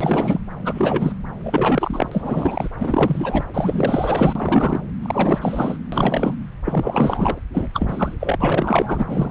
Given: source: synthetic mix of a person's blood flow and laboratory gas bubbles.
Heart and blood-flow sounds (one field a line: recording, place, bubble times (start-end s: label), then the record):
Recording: Doppler ultrasound of blood flow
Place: subclavian vein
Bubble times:
0.01-0.39 s: bubbles
0.62-1.12 s: bubbles
1.43-2.09 s: bubbles
2.11-2.69 s: bubbles
2.79-3.44 s: bubbles
3.53-4.82 s: bubbles
5.02-5.78 s: bubbles
5.92-6.37 s: bubbles
6.65-7.40 s: bubbles
7.54-7.68 s: bubbles
7.73-8.15 s: bubbles
8.20-8.36 s: bubbles
8.38-9.31 s: bubbles
From the record:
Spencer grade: 4 (maximum detectable bubble signal sounding continuously throughout systole and diastole of every cardiac period, and overriding the amplitude of the normal cardiac signals)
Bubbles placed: anywhere in the cardiac cycle